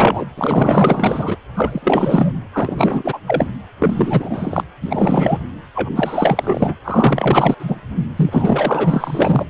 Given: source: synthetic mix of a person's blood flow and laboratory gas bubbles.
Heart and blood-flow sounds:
Doppler ultrasound of blood flow; precordium
0.00-0.25 s: bubbles
0.38-1.38 s: bubbles
1.54-2.40 s: bubbles
2.53-3.19 s: bubbles
3.27-3.47 s: bubbles
3.79-4.64 s: bubbles
4.82-5.39 s: bubbles
5.75-5.89 s: bubbles
5.95-6.76 s: bubbles
6.84-7.54 s: bubbles
7.59-7.76 s: bubbles
8.16-9.46 s: bubbles
From the record:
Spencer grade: 4 (maximum detectable bubble signal sounding continuously throughout systole and diastole of every cardiac period, and overriding the amplitude of the normal cardiac signals); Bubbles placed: anywhere in the cardiac cycle

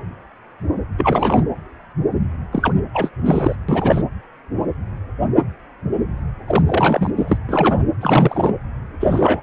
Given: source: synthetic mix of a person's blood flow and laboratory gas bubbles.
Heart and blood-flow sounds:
Doppler ultrasound of blood flow; precordium
0.97-1.44 s: bubbles
2.52-2.73 s: bubbles
2.93-3.10 s: bubbles
3.25-3.56 s: bubbles
3.69-4.04 s: bubbles
6.47-6.63 s: bubbles
6.67-7.11 s: bubbles
7.16-7.38 s: bubbles
7.49-7.83 s: bubbles
8.00-8.53 s: bubbles
8.99-9.43 s: bubbles
From the record:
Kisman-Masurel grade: 333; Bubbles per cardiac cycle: rolling drumbeat, 9 or more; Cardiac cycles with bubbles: 50 to 99%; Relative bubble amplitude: loud (0.450 to 0.775); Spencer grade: 3 (all of the cardiac periods contain showers or single bubble signals, but not dominating or overriding the cardiac motion signals); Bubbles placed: anywhere in the cardiac cycle

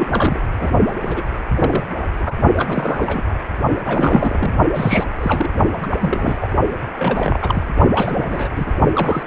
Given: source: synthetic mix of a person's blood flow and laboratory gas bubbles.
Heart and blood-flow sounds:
Doppler ultrasound of blood flow; precordium
0.00-0.40 s: bubbles
0.60-0.70 s: bubbles
0.88-1.23 s: bubbles
1.31-1.39 s: bubbles
1.55-1.84 s: bubbles
2.18-2.37 s: bubbles
2.57-3.33 s: bubbles
3.83-4.55 s: bubbles
4.74-5.05 s: bubbles
5.18-5.50 s: bubbles
5.72-5.87 s: bubbles
5.89-6.38 s: bubbles
6.41-6.48 s: bubbles
6.70-6.77 s: bubbles
6.98-7.63 s: bubbles
7.94-8.49 s: bubbles
8.54-8.72 s: bubbles
8.93-9.23 s: bubbles
From the record:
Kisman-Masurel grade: 332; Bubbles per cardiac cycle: rolling drumbeat, 9 or more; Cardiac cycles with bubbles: 50 to 99%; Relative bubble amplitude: moderate (0.250 to 0.450); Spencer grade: 3 (all of the cardiac periods contain showers or single bubble signals, but not dominating or overriding the cardiac motion signals); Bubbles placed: only in the low amplitude regions of the cardiac cycle

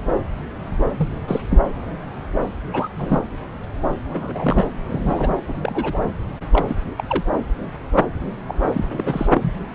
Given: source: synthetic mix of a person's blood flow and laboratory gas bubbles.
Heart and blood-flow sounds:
Doppler ultrasound of blood flow; subclavian vein
0.97-1.08 s: bubbles
1.28-1.41 s: bubbles
1.50-1.60 s: bubbles
2.73-2.89 s: bubbles
2.95-3.22 s: bubbles
4.08-4.67 s: bubbles
4.89-5.35 s: bubbles
5.47-5.59 s: bubbles
5.63-5.99 s: bubbles
6.53-6.74 s: bubbles
6.97-7.03 s: bubbles
7.08-7.23 s: bubbles
8.48-8.54 s: bubbles
8.73-9.28 s: bubbles
9.32-9.53 s: bubbles
From the record:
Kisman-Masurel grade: 232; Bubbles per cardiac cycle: several, 3 to 8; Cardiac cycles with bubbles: 50 to 99%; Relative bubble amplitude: moderate (0.250 to 0.450); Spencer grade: 3 (all of the cardiac periods contain showers or single bubble signals, but not dominating or overriding the cardiac motion signals); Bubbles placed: anywhere in the cardiac cycle

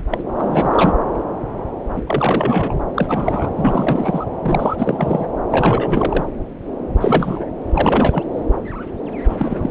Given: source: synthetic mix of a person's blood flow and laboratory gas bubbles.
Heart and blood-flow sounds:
Doppler ultrasound of blood flow; subclavian vein
0.11-0.23 s: bubbles
0.37-0.93 s: bubbles
1.96-2.02 s: bubbles
2.06-2.74 s: bubbles
2.95-3.50 s: bubbles
3.56-4.25 s: bubbles
4.42-5.27 s: bubbles
5.50-6.25 s: bubbles
6.93-7.50 s: bubbles
7.72-8.23 s: bubbles
9.29-9.71 s: bubbles
From the record:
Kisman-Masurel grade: 333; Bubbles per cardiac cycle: rolling drumbeat, 9 or more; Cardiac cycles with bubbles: 50 to 99%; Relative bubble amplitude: loud (0.450 to 0.775); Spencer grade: 3 (all of the cardiac periods contain showers or single bubble signals, but not dominating or overriding the cardiac motion signals); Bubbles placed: anywhere in the cardiac cycle

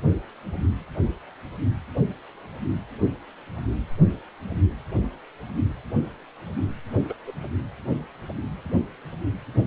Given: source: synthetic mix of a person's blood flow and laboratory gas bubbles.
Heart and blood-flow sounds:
Doppler ultrasound of blood flow; precordium
7.08-7.13 s: bubbles
7.26-7.32 s: bubbles
From the record:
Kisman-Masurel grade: 111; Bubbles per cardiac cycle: 1 to 2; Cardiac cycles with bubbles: 1 to 10%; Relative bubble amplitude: barely perceptible (0.100 to 0.250); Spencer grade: 1 (occasional bubble signal discernible with the cardiac motion signal, with majority of cardiac periods free of bubbles); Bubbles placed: anywhere in the cardiac cycle

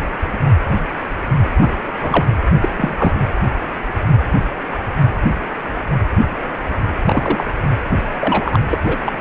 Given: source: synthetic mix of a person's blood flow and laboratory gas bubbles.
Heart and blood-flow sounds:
Doppler ultrasound of blood flow; precordium
1.60-1.74 s: bubbles
2.00-2.26 s: bubbles
2.60-2.69 s: bubbles
2.76-2.95 s: bubbles
2.98-3.13 s: bubbles
7.06-7.44 s: bubbles
8.12-8.61 s: bubbles
8.72-8.79 s: bubbles
8.86-8.98 s: bubbles
9.05-9.12 s: bubbles
9.19-9.21 s: bubbles
From the record:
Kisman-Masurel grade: 222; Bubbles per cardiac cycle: several, 3 to 8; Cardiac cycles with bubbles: 10 to 50%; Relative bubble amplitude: moderate (0.250 to 0.450); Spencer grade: 2 (many but less than half of the cardiac periods contain bubble signals, singularly or in groups); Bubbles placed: anywhere in the cardiac cycle

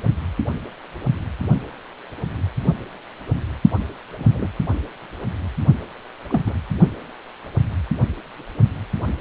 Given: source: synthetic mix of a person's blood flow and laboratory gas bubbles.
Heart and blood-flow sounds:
Doppler ultrasound of blood flow; precordium
4.18-4.49 s: bubbles
6.29-6.41 s: bubbles
6.46-6.53 s: bubbles
From the record:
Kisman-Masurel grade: 122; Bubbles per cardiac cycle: 1 to 2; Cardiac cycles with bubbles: 10 to 50%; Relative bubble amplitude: moderate (0.250 to 0.450); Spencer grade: 2 (many but less than half of the cardiac periods contain bubble signals, singularly or in groups); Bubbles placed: only in the low amplitude regions of the cardiac cycle

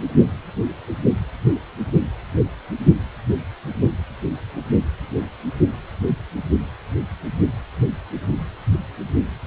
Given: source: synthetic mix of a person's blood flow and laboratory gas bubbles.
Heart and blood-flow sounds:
Doppler ultrasound of blood flow; precordium
no bubbles
From the record:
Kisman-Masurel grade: 000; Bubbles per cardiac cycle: 0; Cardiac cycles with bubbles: 0%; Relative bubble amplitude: no bubbles discernible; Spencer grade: 0 (complete lack of bubble signals)

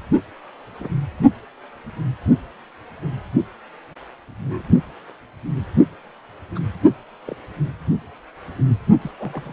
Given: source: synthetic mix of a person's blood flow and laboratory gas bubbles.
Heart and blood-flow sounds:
Doppler ultrasound of blood flow; precordium
0.79-0.89 s: bubbles
4.38-4.62 s: bubbles
6.55-6.59 s: bubbles
7.26-7.35 s: bubbles
9.01-9.11 s: bubbles
9.19-9.53 s: bubbles
From the record:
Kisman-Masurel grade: 121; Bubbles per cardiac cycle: 1 to 2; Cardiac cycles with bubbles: 10 to 50%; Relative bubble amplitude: barely perceptible (0.100 to 0.250); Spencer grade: 2 (many but less than half of the cardiac periods contain bubble signals, singularly or in groups); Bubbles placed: only in the low amplitude regions of the cardiac cycle

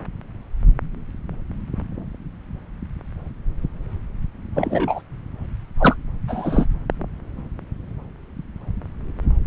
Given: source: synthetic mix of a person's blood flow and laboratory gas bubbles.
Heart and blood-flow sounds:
Doppler ultrasound of blood flow; subclavian vein
4.54-5.02 s: bubbles
5.79-5.96 s: bubbles
6.28-6.66 s: bubbles
From the record:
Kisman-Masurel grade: 223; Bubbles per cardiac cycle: several, 3 to 8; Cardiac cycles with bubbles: 10 to 50%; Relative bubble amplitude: loud (0.450 to 0.775); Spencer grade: 2 (many but less than half of the cardiac periods contain bubble signals, singularly or in groups); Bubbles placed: anywhere in the cardiac cycle

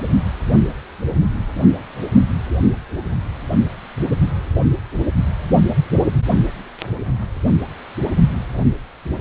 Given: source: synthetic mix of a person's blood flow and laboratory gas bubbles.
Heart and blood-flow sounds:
Doppler ultrasound of blood flow; precordium
no bubbles
From the record:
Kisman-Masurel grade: 000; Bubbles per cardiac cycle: 0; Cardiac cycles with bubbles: 0%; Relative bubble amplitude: no bubbles discernible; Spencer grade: 0 (complete lack of bubble signals)

